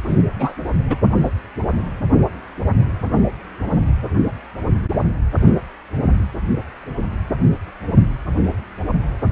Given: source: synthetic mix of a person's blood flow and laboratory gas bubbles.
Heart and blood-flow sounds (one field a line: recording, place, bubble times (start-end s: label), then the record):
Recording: Doppler ultrasound of blood flow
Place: precordium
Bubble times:
0.07-0.22 s: bubbles
0.39-0.54 s: bubbles
0.89-0.96 s: bubbles
From the record:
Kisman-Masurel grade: 213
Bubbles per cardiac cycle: several, 3 to 8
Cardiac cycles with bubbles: 1 to 10%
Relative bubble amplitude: loud (0.450 to 0.775)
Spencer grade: 1 (occasional bubble signal discernible with the cardiac motion signal, with majority of cardiac periods free of bubbles)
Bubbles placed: only in the low amplitude regions of the cardiac cycle